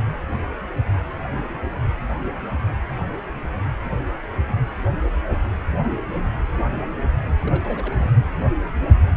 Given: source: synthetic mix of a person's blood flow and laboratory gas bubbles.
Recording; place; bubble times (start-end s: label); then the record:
Doppler ultrasound of blood flow; precordium
7.40-8.12 s: bubbles
From the record:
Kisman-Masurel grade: 211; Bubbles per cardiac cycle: several, 3 to 8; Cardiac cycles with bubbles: 1 to 10%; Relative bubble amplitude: barely perceptible (0.100 to 0.250); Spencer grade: 1 (occasional bubble signal discernible with the cardiac motion signal, with majority of cardiac periods free of bubbles); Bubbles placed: anywhere in the cardiac cycle